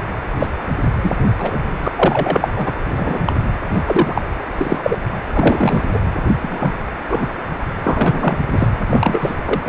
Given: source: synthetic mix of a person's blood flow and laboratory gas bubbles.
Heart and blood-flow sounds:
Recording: Doppler ultrasound of blood flow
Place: precordium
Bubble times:
0.39-0.46 s: bubbles
1.02-1.15 s: bubbles
1.38-1.56 s: bubbles
1.84-1.88 s: bubbles
1.95-2.51 s: bubbles
2.57-2.72 s: bubbles
2.96-3.20 s: bubbles
3.25-3.34 s: bubbles
3.73-3.82 s: bubbles
3.86-4.21 s: bubbles
4.58-4.79 s: bubbles
4.83-4.97 s: bubbles
5.33-5.85 s: bubbles
5.93-5.99 s: bubbles
6.42-6.73 s: bubbles
7.08-7.28 s: bubbles
7.84-8.37 s: bubbles
8.47-8.68 s: bubbles
8.90-9.35 s: bubbles
9.45-9.62 s: bubbles
9.65-9.69 s: bubbles
From the record:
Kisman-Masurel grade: 243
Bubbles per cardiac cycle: several, 3 to 8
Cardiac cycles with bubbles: 100%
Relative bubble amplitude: loud (0.450 to 0.775)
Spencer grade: 3 (all of the cardiac periods contain showers or single bubble signals, but not dominating or overriding the cardiac motion signals)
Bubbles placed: anywhere in the cardiac cycle

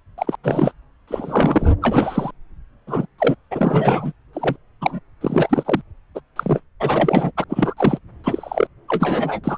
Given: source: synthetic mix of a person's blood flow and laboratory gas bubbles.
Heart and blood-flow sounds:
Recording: Doppler ultrasound of blood flow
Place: subclavian vein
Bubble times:
0.18-0.35 s: bubbles
0.43-0.72 s: bubbles
1.08-1.72 s: bubbles
1.82-2.31 s: bubbles
2.87-3.06 s: bubbles
3.18-3.35 s: bubbles
3.51-4.12 s: bubbles
4.33-4.56 s: bubbles
4.81-5.00 s: bubbles
5.21-5.82 s: bubbles
6.15-6.20 s: bubbles
6.36-6.61 s: bubbles
6.80-7.31 s: bubbles
7.37-7.44 s: bubbles
7.50-7.74 s: bubbles
7.76-7.99 s: bubbles
8.24-8.67 s: bubbles
8.88-9.40 s: bubbles
9.43-9.58 s: bubbles
From the record:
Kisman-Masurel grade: 243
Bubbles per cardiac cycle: several, 3 to 8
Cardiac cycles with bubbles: 100%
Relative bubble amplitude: loud (0.450 to 0.775)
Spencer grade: 3 (all of the cardiac periods contain showers or single bubble signals, but not dominating or overriding the cardiac motion signals)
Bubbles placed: anywhere in the cardiac cycle

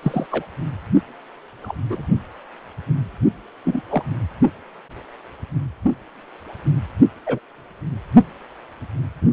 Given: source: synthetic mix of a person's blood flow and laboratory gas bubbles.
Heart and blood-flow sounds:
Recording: Doppler ultrasound of blood flow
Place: precordium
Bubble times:
0.03-0.26 s: bubbles
0.31-0.44 s: bubbles
1.61-1.74 s: bubbles
1.90-2.06 s: bubbles
3.65-3.81 s: bubbles
3.90-4.03 s: bubbles
7.26-7.39 s: bubbles
From the record:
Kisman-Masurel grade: 122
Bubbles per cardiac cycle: 1 to 2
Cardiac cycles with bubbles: 10 to 50%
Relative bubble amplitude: moderate (0.250 to 0.450)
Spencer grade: 2 (many but less than half of the cardiac periods contain bubble signals, singularly or in groups)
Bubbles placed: only in the low amplitude regions of the cardiac cycle

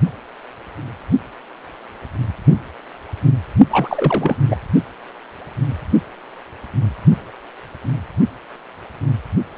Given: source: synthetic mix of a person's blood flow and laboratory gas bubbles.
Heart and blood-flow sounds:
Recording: Doppler ultrasound of blood flow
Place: precordium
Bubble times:
3.71-4.36 s: bubbles
4.48-4.55 s: bubbles
From the record:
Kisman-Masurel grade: 212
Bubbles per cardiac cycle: several, 3 to 8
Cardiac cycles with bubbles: 1 to 10%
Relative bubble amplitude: moderate (0.250 to 0.450)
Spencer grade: 1 (occasional bubble signal discernible with the cardiac motion signal, with majority of cardiac periods free of bubbles)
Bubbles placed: only in the low amplitude regions of the cardiac cycle

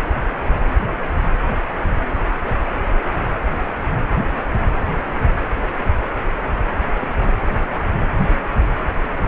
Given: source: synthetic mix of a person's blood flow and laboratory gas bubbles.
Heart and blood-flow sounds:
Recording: Doppler ultrasound of blood flow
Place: precordium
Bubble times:
7.01-7.07 s: bubbles
7.25-7.33 s: bubbles
From the record:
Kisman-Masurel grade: 111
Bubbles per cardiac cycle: 1 to 2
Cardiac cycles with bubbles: 1 to 10%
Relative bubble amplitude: barely perceptible (0.100 to 0.250)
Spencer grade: 1 (occasional bubble signal discernible with the cardiac motion signal, with majority of cardiac periods free of bubbles)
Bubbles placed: anywhere in the cardiac cycle

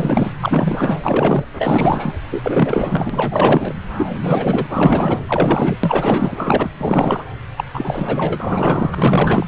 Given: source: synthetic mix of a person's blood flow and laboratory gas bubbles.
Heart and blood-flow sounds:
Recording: Doppler ultrasound of blood flow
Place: subclavian vein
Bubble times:
0.00-0.34 s: bubbles
0.41-0.99 s: bubbles
1.03-1.45 s: bubbles
1.57-2.14 s: bubbles
2.31-3.74 s: bubbles
3.98-4.07 s: bubbles
4.21-5.21 s: bubbles
5.28-5.78 s: bubbles
5.83-6.71 s: bubbles
6.78-7.24 s: bubbles
7.57-7.65 s: bubbles
7.74-9.46 s: bubbles
From the record:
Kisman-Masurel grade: 444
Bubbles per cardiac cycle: continuous sound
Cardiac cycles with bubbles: 100%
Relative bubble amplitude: maximal (0.775 to 0.999)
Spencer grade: 4 (maximum detectable bubble signal sounding continuously throughout systole and diastole of every cardiac period, and overriding the amplitude of the normal cardiac signals)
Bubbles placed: anywhere in the cardiac cycle

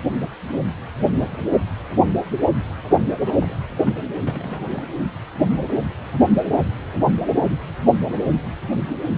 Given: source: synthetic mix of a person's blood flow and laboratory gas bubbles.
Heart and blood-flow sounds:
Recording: Doppler ultrasound of blood flow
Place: precordium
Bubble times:
0.93-1.05 s: bubbles
1.14-1.45 s: bubbles
1.49-1.58 s: bubbles
3.27-3.32 s: bubbles
3.40-3.56 s: bubbles
3.77-3.91 s: bubbles
4.20-4.70 s: bubbles
4.72-4.83 s: bubbles
From the record:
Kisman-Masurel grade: 221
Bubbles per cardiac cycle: several, 3 to 8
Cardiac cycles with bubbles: 10 to 50%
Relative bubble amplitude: barely perceptible (0.100 to 0.250)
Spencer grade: 2 (many but less than half of the cardiac periods contain bubble signals, singularly or in groups)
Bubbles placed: anywhere in the cardiac cycle

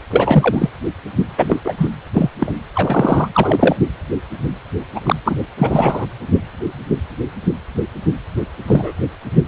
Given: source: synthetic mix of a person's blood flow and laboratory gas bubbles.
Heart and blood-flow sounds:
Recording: Doppler ultrasound of blood flow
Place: precordium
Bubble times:
0.10-0.70 s: bubbles
1.38-1.58 s: bubbles
1.65-1.74 s: bubbles
1.78-1.88 s: bubbles
2.14-2.30 s: bubbles
2.40-2.52 s: bubbles
2.75-3.28 s: bubbles
3.32-3.76 s: bubbles
3.78-3.85 s: bubbles
4.95-5.00 s: bubbles
5.04-5.16 s: bubbles
5.25-5.36 s: bubbles
5.58-6.06 s: bubbles
8.67-8.93 s: bubbles
From the record:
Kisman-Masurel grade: 233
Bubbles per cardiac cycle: several, 3 to 8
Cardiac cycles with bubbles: 50 to 99%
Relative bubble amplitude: loud (0.450 to 0.775)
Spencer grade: 3 (all of the cardiac periods contain showers or single bubble signals, but not dominating or overriding the cardiac motion signals)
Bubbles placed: anywhere in the cardiac cycle

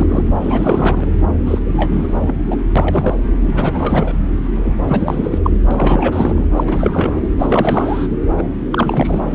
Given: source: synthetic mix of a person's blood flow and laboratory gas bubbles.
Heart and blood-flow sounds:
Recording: Doppler ultrasound of blood flow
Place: subclavian vein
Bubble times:
0.00-0.24 s: bubbles
0.40-1.06 s: bubbles
1.45-1.58 s: bubbles
1.64-2.18 s: bubbles
2.21-2.58 s: bubbles
2.75-3.15 s: bubbles
3.41-4.15 s: bubbles
4.65-4.78 s: bubbles
4.88-5.39 s: bubbles
5.43-5.50 s: bubbles
5.71-6.47 s: bubbles
6.56-6.64 s: bubbles
6.67-7.29 s: bubbles
7.39-8.08 s: bubbles
8.37-8.43 s: bubbles
8.71-9.35 s: bubbles
From the record:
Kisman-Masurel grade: 343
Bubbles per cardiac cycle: rolling drumbeat, 9 or more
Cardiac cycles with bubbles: 100%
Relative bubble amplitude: loud (0.450 to 0.775)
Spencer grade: 3 (all of the cardiac periods contain showers or single bubble signals, but not dominating or overriding the cardiac motion signals)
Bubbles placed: anywhere in the cardiac cycle

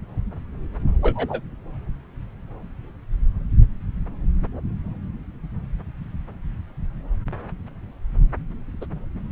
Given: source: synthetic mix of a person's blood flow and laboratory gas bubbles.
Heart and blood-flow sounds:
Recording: Doppler ultrasound of blood flow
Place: subclavian vein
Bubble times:
1.02-1.41 s: bubbles
8.80-8.86 s: bubbles
From the record:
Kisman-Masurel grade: 122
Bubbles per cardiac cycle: 1 to 2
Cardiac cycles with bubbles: 10 to 50%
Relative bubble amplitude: moderate (0.250 to 0.450)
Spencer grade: 2 (many but less than half of the cardiac periods contain bubble signals, singularly or in groups)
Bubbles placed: anywhere in the cardiac cycle

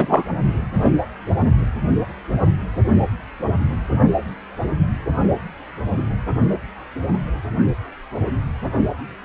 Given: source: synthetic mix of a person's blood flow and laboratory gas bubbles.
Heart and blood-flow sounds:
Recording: Doppler ultrasound of blood flow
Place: precordium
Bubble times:
0.00-0.24 s: bubbles
From the record:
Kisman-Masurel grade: 213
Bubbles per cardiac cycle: several, 3 to 8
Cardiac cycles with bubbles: 1 to 10%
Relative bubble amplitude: loud (0.450 to 0.775)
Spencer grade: 1 (occasional bubble signal discernible with the cardiac motion signal, with majority of cardiac periods free of bubbles)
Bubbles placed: only in the low amplitude regions of the cardiac cycle

